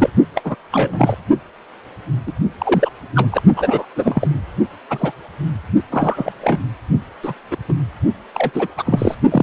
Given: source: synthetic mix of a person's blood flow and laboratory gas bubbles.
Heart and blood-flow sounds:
Doppler ultrasound of blood flow; precordium
0.00-0.10 s: bubbles
0.35-0.56 s: bubbles
0.71-1.15 s: bubbles
2.27-2.33 s: bubbles
2.58-2.90 s: bubbles
3.15-3.29 s: bubbles
3.31-3.43 s: bubbles
3.56-3.85 s: bubbles
3.96-4.28 s: bubbles
4.90-5.12 s: bubbles
5.91-6.33 s: bubbles
6.42-6.58 s: bubbles
7.23-7.34 s: bubbles
7.51-7.57 s: bubbles
7.68-7.74 s: bubbles
8.34-8.51 s: bubbles
8.53-8.67 s: bubbles
8.76-9.15 s: bubbles
9.30-9.43 s: bubbles
From the record:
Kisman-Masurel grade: 243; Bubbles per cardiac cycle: several, 3 to 8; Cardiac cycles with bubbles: 100%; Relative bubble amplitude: loud (0.450 to 0.775); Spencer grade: 3 (all of the cardiac periods contain showers or single bubble signals, but not dominating or overriding the cardiac motion signals); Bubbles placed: only in the low amplitude regions of the cardiac cycle

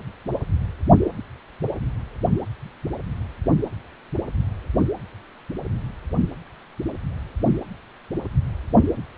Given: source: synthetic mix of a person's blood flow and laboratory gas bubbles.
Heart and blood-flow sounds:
Doppler ultrasound of blood flow; precordium
no bubbles
From the record:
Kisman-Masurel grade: 000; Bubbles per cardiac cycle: 0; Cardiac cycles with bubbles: 0%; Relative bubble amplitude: no bubbles discernible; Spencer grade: 0 (complete lack of bubble signals)

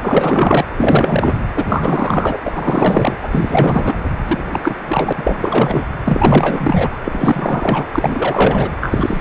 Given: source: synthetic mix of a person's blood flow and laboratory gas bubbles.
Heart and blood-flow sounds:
Doppler ultrasound of blood flow; precordium
0.02-0.65 s: bubbles
0.78-1.39 s: bubbles
1.54-2.38 s: bubbles
2.43-3.17 s: bubbles
3.23-3.96 s: bubbles
4.25-4.60 s: bubbles
4.62-4.75 s: bubbles
4.88-5.12 s: bubbles
5.17-5.85 s: bubbles
6.04-6.98 s: bubbles
7.04-7.85 s: bubbles
7.92-8.69 s: bubbles
8.80-9.21 s: bubbles
From the record:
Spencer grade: 4 (maximum detectable bubble signal sounding continuously throughout systole and diastole of every cardiac period, and overriding the amplitude of the normal cardiac signals); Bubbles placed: anywhere in the cardiac cycle

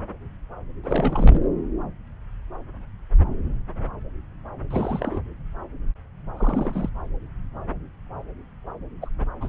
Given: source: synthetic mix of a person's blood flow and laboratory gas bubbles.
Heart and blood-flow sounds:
Doppler ultrasound of blood flow; subclavian vein
0.83-1.48 s: bubbles
4.71-5.21 s: bubbles
6.37-6.89 s: bubbles
9.01-9.10 s: bubbles
9.41-9.48 s: bubbles
From the record:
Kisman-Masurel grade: 221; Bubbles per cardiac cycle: several, 3 to 8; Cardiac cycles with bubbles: 10 to 50%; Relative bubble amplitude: barely perceptible (0.100 to 0.250); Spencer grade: 2 (many but less than half of the cardiac periods contain bubble signals, singularly or in groups); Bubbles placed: anywhere in the cardiac cycle

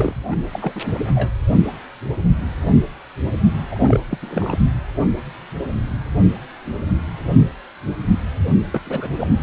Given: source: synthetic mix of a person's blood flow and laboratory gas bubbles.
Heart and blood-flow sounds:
Doppler ultrasound of blood flow; precordium
0.00-0.13 s: bubbles
0.30-0.36 s: bubbles
0.51-0.73 s: bubbles
0.75-0.81 s: bubbles
0.84-0.99 s: bubbles
1.15-1.30 s: bubbles
3.71-4.00 s: bubbles
4.09-4.18 s: bubbles
4.21-4.59 s: bubbles
8.72-8.80 s: bubbles
8.86-9.08 s: bubbles
9.19-9.28 s: bubbles
9.37-9.43 s: bubbles
From the record:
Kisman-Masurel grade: 222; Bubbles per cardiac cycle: several, 3 to 8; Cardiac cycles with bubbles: 10 to 50%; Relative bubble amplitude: moderate (0.250 to 0.450); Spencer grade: 2 (many but less than half of the cardiac periods contain bubble signals, singularly or in groups); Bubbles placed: only in the low amplitude regions of the cardiac cycle

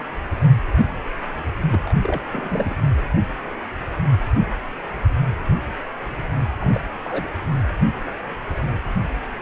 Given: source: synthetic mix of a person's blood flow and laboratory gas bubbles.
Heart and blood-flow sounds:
Doppler ultrasound of blood flow; precordium
1.72-1.94 s: bubbles
2.02-2.21 s: bubbles
2.27-2.75 s: bubbles
6.60-6.80 s: bubbles
7.05-7.28 s: bubbles
From the record:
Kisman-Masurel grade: 221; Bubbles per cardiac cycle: several, 3 to 8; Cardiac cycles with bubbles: 10 to 50%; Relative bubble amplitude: barely perceptible (0.100 to 0.250); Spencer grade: 2 (many but less than half of the cardiac periods contain bubble signals, singularly or in groups); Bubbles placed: anywhere in the cardiac cycle

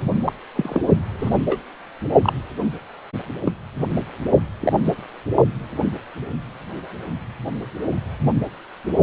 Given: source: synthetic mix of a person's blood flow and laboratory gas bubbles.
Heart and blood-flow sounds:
Doppler ultrasound of blood flow; precordium
0.25-0.32 s: bubbles
0.55-0.81 s: bubbles
1.18-1.38 s: bubbles
1.47-1.60 s: bubbles
2.22-2.33 s: bubbles
3.46-3.52 s: bubbles
4.60-4.73 s: bubbles
From the record:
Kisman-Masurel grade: 122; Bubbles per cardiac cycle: 1 to 2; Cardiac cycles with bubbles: 10 to 50%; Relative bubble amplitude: moderate (0.250 to 0.450); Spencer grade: 2 (many but less than half of the cardiac periods contain bubble signals, singularly or in groups); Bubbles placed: only in the low amplitude regions of the cardiac cycle

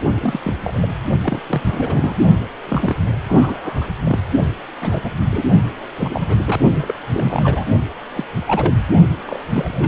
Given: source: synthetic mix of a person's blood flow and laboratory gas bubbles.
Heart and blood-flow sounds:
Doppler ultrasound of blood flow; precordium
0.21-0.55 s: bubbles
0.63-0.79 s: bubbles
0.82-0.89 s: bubbles
1.22-1.41 s: bubbles
1.49-1.61 s: bubbles
1.65-2.17 s: bubbles
2.68-2.96 s: bubbles
3.28-3.86 s: bubbles
4.04-4.19 s: bubbles
4.82-5.14 s: bubbles
5.31-5.43 s: bubbles
5.98-6.37 s: bubbles
6.45-6.61 s: bubbles
6.75-6.98 s: bubbles
7.11-7.66 s: bubbles
8.16-8.25 s: bubbles
8.47-8.79 s: bubbles
9.25-9.39 s: bubbles
9.48-9.88 s: bubbles
From the record:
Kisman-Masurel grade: 242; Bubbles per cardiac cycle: several, 3 to 8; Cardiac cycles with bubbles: 100%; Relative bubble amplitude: moderate (0.250 to 0.450); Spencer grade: 3 (all of the cardiac periods contain showers or single bubble signals, but not dominating or overriding the cardiac motion signals); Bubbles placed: only in the low amplitude regions of the cardiac cycle

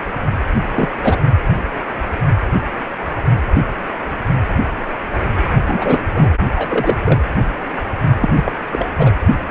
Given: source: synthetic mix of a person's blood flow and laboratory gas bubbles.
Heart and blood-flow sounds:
Doppler ultrasound of blood flow; precordium
0.74-0.89 s: bubbles
1.03-1.17 s: bubbles
5.59-6.05 s: bubbles
6.14-6.31 s: bubbles
6.55-6.97 s: bubbles
7.05-7.21 s: bubbles
8.20-8.29 s: bubbles
8.36-8.52 s: bubbles
8.73-8.88 s: bubbles
8.98-9.11 s: bubbles
From the record:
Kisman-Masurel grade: 223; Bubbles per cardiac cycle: several, 3 to 8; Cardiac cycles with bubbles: 10 to 50%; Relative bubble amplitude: loud (0.450 to 0.775); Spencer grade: 2 (many but less than half of the cardiac periods contain bubble signals, singularly or in groups); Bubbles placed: anywhere in the cardiac cycle

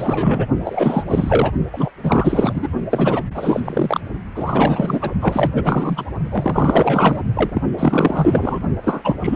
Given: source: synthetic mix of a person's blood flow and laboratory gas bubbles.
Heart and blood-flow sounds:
Doppler ultrasound of blood flow; precordium
0.00-0.45 s: bubbles
0.64-1.51 s: bubbles
1.73-1.92 s: bubbles
2.03-2.68 s: bubbles
2.90-3.23 s: bubbles
3.34-3.60 s: bubbles
3.64-4.00 s: bubbles
4.34-5.11 s: bubbles
5.21-6.04 s: bubbles
6.29-7.21 s: bubbles
7.35-7.50 s: bubbles
7.54-7.62 s: bubbles
7.77-8.60 s: bubbles
8.84-9.16 s: bubbles
9.21-9.35 s: bubbles
From the record:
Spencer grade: 4 (maximum detectable bubble signal sounding continuously throughout systole and diastole of every cardiac period, and overriding the amplitude of the normal cardiac signals); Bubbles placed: only in the low amplitude regions of the cardiac cycle

